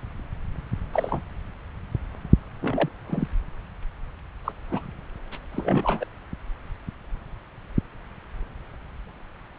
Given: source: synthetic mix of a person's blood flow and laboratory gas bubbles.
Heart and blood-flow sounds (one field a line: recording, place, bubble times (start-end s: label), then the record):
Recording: Doppler ultrasound of blood flow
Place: subclavian vein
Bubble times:
0.93-1.20 s: bubbles
2.61-2.90 s: bubbles
3.07-3.28 s: bubbles
4.44-4.52 s: bubbles
4.70-4.87 s: bubbles
5.32-5.38 s: bubbles
5.53-6.06 s: bubbles
From the record:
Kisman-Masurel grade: 232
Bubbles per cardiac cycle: several, 3 to 8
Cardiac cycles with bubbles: 50 to 99%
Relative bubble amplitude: moderate (0.250 to 0.450)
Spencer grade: 3 (all of the cardiac periods contain showers or single bubble signals, but not dominating or overriding the cardiac motion signals)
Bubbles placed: anywhere in the cardiac cycle